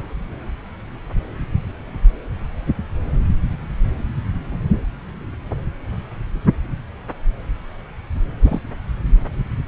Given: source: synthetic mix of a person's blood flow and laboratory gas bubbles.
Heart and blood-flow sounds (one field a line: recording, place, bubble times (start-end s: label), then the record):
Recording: Doppler ultrasound of blood flow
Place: subclavian vein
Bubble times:
4.72-4.80 s: bubbles
8.42-8.60 s: bubbles
From the record:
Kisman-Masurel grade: 122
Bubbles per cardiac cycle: 1 to 2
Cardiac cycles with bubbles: 10 to 50%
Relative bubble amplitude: moderate (0.250 to 0.450)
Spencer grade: 2 (many but less than half of the cardiac periods contain bubble signals, singularly or in groups)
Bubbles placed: anywhere in the cardiac cycle